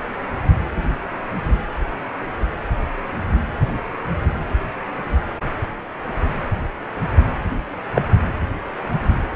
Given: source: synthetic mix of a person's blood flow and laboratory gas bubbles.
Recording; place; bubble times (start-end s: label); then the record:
Doppler ultrasound of blood flow; precordium
7.94-8.02 s: bubbles
From the record:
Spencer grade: 1 (occasional bubble signal discernible with the cardiac motion signal, with majority of cardiac periods free of bubbles); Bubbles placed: anywhere in the cardiac cycle